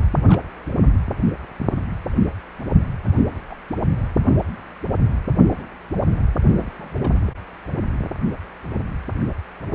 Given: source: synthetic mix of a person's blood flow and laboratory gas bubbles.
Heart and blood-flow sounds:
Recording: Doppler ultrasound of blood flow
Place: precordium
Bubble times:
0.12-0.41 s: bubbles
3.50-3.55 s: bubbles
5.51-5.67 s: bubbles
5.93-6.02 s: bubbles
6.56-7.19 s: bubbles
7.22-7.32 s: bubbles
From the record:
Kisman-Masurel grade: 121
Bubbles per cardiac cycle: 1 to 2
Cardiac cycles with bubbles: 10 to 50%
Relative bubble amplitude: barely perceptible (0.100 to 0.250)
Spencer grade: 2 (many but less than half of the cardiac periods contain bubble signals, singularly or in groups)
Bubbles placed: anywhere in the cardiac cycle

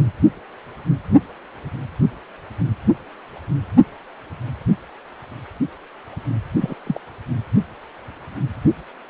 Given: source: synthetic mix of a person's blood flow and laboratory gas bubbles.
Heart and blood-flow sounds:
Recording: Doppler ultrasound of blood flow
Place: precordium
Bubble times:
6.61-6.75 s: bubbles
6.86-7.00 s: bubbles
From the record:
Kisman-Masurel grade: 112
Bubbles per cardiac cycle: 1 to 2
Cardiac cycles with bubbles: 1 to 10%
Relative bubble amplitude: moderate (0.250 to 0.450)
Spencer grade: 1 (occasional bubble signal discernible with the cardiac motion signal, with majority of cardiac periods free of bubbles)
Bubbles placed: anywhere in the cardiac cycle

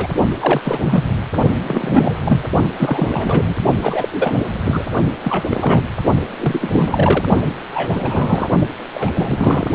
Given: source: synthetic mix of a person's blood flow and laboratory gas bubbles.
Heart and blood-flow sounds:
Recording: Doppler ultrasound of blood flow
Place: precordium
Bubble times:
0.00-0.07 s: bubbles
0.41-0.60 s: bubbles
0.64-1.04 s: bubbles
1.67-2.17 s: bubbles
2.24-2.50 s: bubbles
2.77-3.55 s: bubbles
3.81-4.08 s: bubbles
4.12-4.41 s: bubbles
4.65-4.84 s: bubbles
5.21-5.45 s: bubbles
5.50-5.84 s: bubbles
6.38-7.25 s: bubbles
7.74-8.49 s: bubbles
8.95-9.67 s: bubbles
From the record:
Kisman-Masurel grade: 342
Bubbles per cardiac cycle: rolling drumbeat, 9 or more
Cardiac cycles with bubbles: 100%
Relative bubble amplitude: moderate (0.250 to 0.450)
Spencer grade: 3 (all of the cardiac periods contain showers or single bubble signals, but not dominating or overriding the cardiac motion signals)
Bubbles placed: only in the low amplitude regions of the cardiac cycle

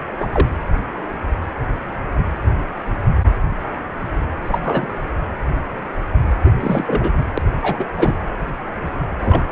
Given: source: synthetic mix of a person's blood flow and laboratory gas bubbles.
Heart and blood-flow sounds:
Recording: Doppler ultrasound of blood flow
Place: precordium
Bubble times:
0.20-0.27 s: bubbles
0.33-0.48 s: bubbles
4.44-4.59 s: bubbles
4.62-4.90 s: bubbles
4.92-4.98 s: bubbles
6.45-6.51 s: bubbles
6.60-7.14 s: bubbles
7.38-7.42 s: bubbles
7.62-7.86 s: bubbles
7.96-8.16 s: bubbles
9.21-9.44 s: bubbles
From the record:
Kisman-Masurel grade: 222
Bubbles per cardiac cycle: several, 3 to 8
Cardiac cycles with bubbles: 10 to 50%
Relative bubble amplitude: moderate (0.250 to 0.450)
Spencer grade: 2 (many but less than half of the cardiac periods contain bubble signals, singularly or in groups)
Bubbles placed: anywhere in the cardiac cycle

